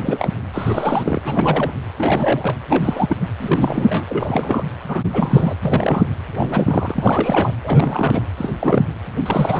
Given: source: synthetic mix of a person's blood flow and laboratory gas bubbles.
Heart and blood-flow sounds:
Doppler ultrasound of blood flow; precordium
0.00-0.34 s: bubbles
0.53-1.20 s: bubbles
1.24-1.71 s: bubbles
1.97-2.55 s: bubbles
2.68-3.17 s: bubbles
3.40-4.05 s: bubbles
4.08-4.63 s: bubbles
4.88-5.04 s: bubbles
5.13-5.55 s: bubbles
5.64-6.06 s: bubbles
6.32-7.54 s: bubbles
7.64-8.22 s: bubbles
8.37-8.49 s: bubbles
8.59-8.87 s: bubbles
9.25-9.60 s: bubbles
From the record:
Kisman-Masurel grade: 343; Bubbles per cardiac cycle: rolling drumbeat, 9 or more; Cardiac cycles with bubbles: 100%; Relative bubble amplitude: loud (0.450 to 0.775); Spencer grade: 3 (all of the cardiac periods contain showers or single bubble signals, but not dominating or overriding the cardiac motion signals); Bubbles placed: anywhere in the cardiac cycle

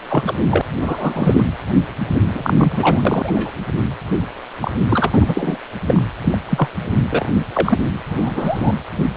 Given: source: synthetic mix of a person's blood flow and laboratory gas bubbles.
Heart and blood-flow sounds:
Doppler ultrasound of blood flow; precordium
0.08-0.23 s: bubbles
0.27-0.35 s: bubbles
0.50-0.61 s: bubbles
0.81-1.44 s: bubbles
2.34-3.52 s: bubbles
4.61-4.71 s: bubbles
4.89-5.11 s: bubbles
5.14-5.57 s: bubbles
5.87-6.03 s: bubbles
6.24-6.38 s: bubbles
6.50-6.69 s: bubbles
7.09-7.29 s: bubbles
7.54-7.79 s: bubbles
8.05-8.72 s: bubbles
From the record:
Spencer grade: 3 (all of the cardiac periods contain showers or single bubble signals, but not dominating or overriding the cardiac motion signals); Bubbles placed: anywhere in the cardiac cycle

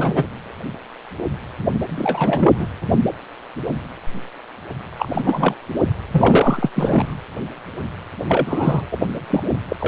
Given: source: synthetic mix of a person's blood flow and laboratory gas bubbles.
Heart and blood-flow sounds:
Doppler ultrasound of blood flow; precordium
0.00-0.27 s: bubbles
1.89-2.53 s: bubbles
2.59-2.68 s: bubbles
4.99-5.08 s: bubbles
5.13-5.21 s: bubbles
5.25-5.54 s: bubbles
6.11-6.70 s: bubbles
6.75-7.14 s: bubbles
8.29-8.86 s: bubbles
8.92-8.97 s: bubbles
9.30-9.44 s: bubbles
9.68-9.76 s: bubbles
9.80-9.88 s: bubbles
From the record:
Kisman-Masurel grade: 332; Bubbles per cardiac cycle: rolling drumbeat, 9 or more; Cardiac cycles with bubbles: 50 to 99%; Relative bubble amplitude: moderate (0.250 to 0.450); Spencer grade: 3 (all of the cardiac periods contain showers or single bubble signals, but not dominating or overriding the cardiac motion signals); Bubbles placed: anywhere in the cardiac cycle

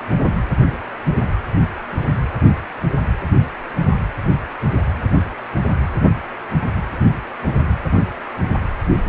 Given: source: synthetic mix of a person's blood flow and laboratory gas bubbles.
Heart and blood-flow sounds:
Doppler ultrasound of blood flow; precordium
no bubbles
From the record:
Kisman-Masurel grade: 000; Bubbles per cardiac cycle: 0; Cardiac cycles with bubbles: 0%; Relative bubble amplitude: no bubbles discernible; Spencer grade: 0 (complete lack of bubble signals)

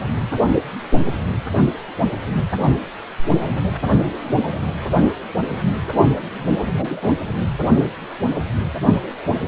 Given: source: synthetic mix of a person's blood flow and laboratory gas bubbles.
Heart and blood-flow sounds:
Doppler ultrasound of blood flow; precordium
6.74-7.12 s: bubbles
From the record:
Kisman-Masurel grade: 112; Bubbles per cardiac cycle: 1 to 2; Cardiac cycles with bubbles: 1 to 10%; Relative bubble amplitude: moderate (0.250 to 0.450); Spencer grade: 1 (occasional bubble signal discernible with the cardiac motion signal, with majority of cardiac periods free of bubbles); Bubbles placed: only in the low amplitude regions of the cardiac cycle

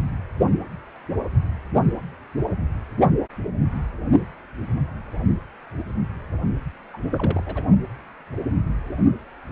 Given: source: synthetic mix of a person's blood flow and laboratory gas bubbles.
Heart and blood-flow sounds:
Doppler ultrasound of blood flow; precordium
6.90-6.98 s: bubbles
7.12-7.43 s: bubbles
7.46-7.62 s: bubbles
From the record:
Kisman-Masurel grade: 211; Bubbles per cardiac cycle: several, 3 to 8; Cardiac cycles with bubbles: 1 to 10%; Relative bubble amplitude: barely perceptible (0.100 to 0.250); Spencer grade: 1 (occasional bubble signal discernible with the cardiac motion signal, with majority of cardiac periods free of bubbles); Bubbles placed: only in the low amplitude regions of the cardiac cycle

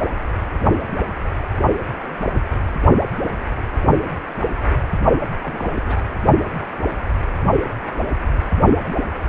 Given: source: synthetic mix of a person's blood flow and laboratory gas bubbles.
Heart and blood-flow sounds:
Doppler ultrasound of blood flow; precordium
5.43-6.02 s: bubbles
From the record:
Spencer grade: 1 (occasional bubble signal discernible with the cardiac motion signal, with majority of cardiac periods free of bubbles); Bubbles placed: only in the low amplitude regions of the cardiac cycle

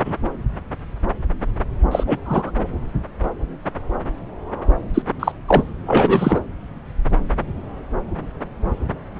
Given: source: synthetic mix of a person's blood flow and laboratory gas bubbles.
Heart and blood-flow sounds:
Doppler ultrasound of blood flow; subclavian vein
0.00-0.02 s: bubbles
0.04-0.16 s: bubbles
1.91-2.04 s: bubbles
2.07-2.18 s: bubbles
2.25-2.51 s: bubbles
4.94-5.02 s: bubbles
5.19-5.32 s: bubbles
5.48-5.63 s: bubbles
5.86-6.40 s: bubbles
From the record:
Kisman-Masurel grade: 223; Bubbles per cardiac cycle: several, 3 to 8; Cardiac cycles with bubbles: 10 to 50%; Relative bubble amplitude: loud (0.450 to 0.775); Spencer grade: 2 (many but less than half of the cardiac periods contain bubble signals, singularly or in groups); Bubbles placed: anywhere in the cardiac cycle

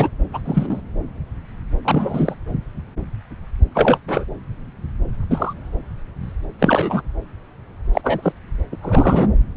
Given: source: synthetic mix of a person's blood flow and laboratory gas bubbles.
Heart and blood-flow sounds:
Doppler ultrasound of blood flow; subclavian vein
0.00-0.09 s: bubbles
0.33-0.42 s: bubbles
0.46-0.81 s: bubbles
1.84-2.35 s: bubbles
3.74-3.98 s: bubbles
4.08-4.24 s: bubbles
5.30-5.54 s: bubbles
6.59-7.02 s: bubbles
7.92-8.01 s: bubbles
8.04-8.32 s: bubbles
8.71-8.76 s: bubbles
8.80-9.28 s: bubbles
From the record:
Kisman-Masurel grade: 233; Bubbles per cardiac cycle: several, 3 to 8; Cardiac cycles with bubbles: 50 to 99%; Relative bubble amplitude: loud (0.450 to 0.775); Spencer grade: 3 (all of the cardiac periods contain showers or single bubble signals, but not dominating or overriding the cardiac motion signals); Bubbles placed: anywhere in the cardiac cycle

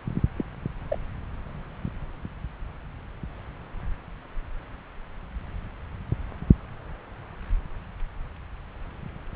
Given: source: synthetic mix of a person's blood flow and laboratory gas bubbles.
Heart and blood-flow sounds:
Doppler ultrasound of blood flow; subclavian vein
0.36-0.44 s: bubbles
0.88-0.98 s: bubbles
From the record:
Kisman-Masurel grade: 111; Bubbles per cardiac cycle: 1 to 2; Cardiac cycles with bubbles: 1 to 10%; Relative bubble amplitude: barely perceptible (0.100 to 0.250); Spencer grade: 1 (occasional bubble signal discernible with the cardiac motion signal, with majority of cardiac periods free of bubbles); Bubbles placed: anywhere in the cardiac cycle

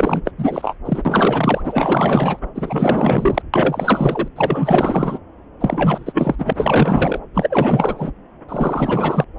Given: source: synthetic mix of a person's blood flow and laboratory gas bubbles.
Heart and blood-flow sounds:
Doppler ultrasound of blood flow; subclavian vein
0.00-0.22 s: bubbles
0.25-0.31 s: bubbles
0.37-0.75 s: bubbles
0.85-1.03 s: bubbles
1.05-1.61 s: bubbles
1.64-2.40 s: bubbles
2.55-3.42 s: bubbles
3.54-4.28 s: bubbles
4.35-5.18 s: bubbles
5.60-6.35 s: bubbles
6.38-7.19 s: bubbles
7.34-8.11 s: bubbles
8.49-9.25 s: bubbles
From the record:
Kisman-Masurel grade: 444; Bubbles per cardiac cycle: continuous sound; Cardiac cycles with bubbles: 100%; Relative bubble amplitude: maximal (0.775 to 0.999); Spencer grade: 4 (maximum detectable bubble signal sounding continuously throughout systole and diastole of every cardiac period, and overriding the amplitude of the normal cardiac signals); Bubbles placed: anywhere in the cardiac cycle

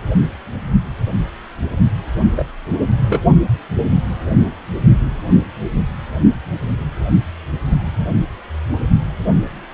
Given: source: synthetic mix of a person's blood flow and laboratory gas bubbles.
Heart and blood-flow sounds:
Doppler ultrasound of blood flow; precordium
2.35-2.47 s: bubbles
2.96-3.24 s: bubbles
From the record:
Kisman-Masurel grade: 112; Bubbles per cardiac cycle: 1 to 2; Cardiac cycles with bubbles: 1 to 10%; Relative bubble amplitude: moderate (0.250 to 0.450); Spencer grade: 1 (occasional bubble signal discernible with the cardiac motion signal, with majority of cardiac periods free of bubbles); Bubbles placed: only in the low amplitude regions of the cardiac cycle

